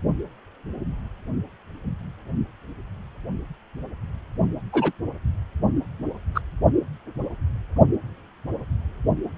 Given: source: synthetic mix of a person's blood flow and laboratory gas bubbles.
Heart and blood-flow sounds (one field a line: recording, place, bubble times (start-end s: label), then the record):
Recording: Doppler ultrasound of blood flow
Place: precordium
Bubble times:
4.72-4.92 s: bubbles
6.34-6.41 s: bubbles
From the record:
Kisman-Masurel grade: 123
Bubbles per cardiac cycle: 1 to 2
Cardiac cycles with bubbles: 10 to 50%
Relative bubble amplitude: loud (0.450 to 0.775)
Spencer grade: 2 (many but less than half of the cardiac periods contain bubble signals, singularly or in groups)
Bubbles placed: only in the low amplitude regions of the cardiac cycle